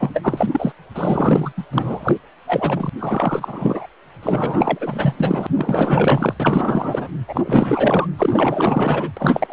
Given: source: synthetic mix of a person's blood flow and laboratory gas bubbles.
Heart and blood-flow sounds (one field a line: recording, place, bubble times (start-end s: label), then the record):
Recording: Doppler ultrasound of blood flow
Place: precordium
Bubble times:
0.00-0.09 s: bubbles
0.14-0.72 s: bubbles
0.94-1.52 s: bubbles
1.57-1.64 s: bubbles
1.71-2.17 s: bubbles
2.47-2.90 s: bubbles
2.99-3.87 s: bubbles
4.22-5.47 s: bubbles
5.56-6.35 s: bubbles
6.39-7.08 s: bubbles
7.27-8.07 s: bubbles
8.17-9.11 s: bubbles
9.16-9.53 s: bubbles
From the record:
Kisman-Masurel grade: 444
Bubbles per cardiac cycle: continuous sound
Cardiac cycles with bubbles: 100%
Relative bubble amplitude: maximal (0.775 to 0.999)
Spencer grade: 4 (maximum detectable bubble signal sounding continuously throughout systole and diastole of every cardiac period, and overriding the amplitude of the normal cardiac signals)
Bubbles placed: anywhere in the cardiac cycle